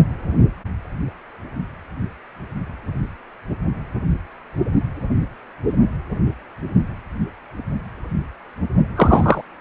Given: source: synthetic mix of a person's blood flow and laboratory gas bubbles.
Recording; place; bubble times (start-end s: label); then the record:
Doppler ultrasound of blood flow; precordium
8.96-9.41 s: bubbles
From the record:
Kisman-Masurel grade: 113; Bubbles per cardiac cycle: 1 to 2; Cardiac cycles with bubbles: 1 to 10%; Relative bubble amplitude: loud (0.450 to 0.775); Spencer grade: 1 (occasional bubble signal discernible with the cardiac motion signal, with majority of cardiac periods free of bubbles); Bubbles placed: anywhere in the cardiac cycle